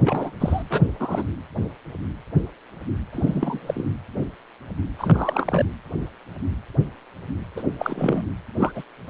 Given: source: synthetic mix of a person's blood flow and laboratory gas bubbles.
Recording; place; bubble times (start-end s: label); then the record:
Doppler ultrasound of blood flow; precordium
0.03-0.32 s: bubbles
0.40-0.62 s: bubbles
0.70-0.82 s: bubbles
0.99-1.24 s: bubbles
3.12-3.92 s: bubbles
4.98-5.66 s: bubbles
7.56-7.63 s: bubbles
7.79-8.23 s: bubbles
8.55-8.72 s: bubbles
8.74-8.83 s: bubbles
From the record:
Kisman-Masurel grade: 232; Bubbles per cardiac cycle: several, 3 to 8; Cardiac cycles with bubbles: 50 to 99%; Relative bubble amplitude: moderate (0.250 to 0.450); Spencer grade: 3 (all of the cardiac periods contain showers or single bubble signals, but not dominating or overriding the cardiac motion signals); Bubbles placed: anywhere in the cardiac cycle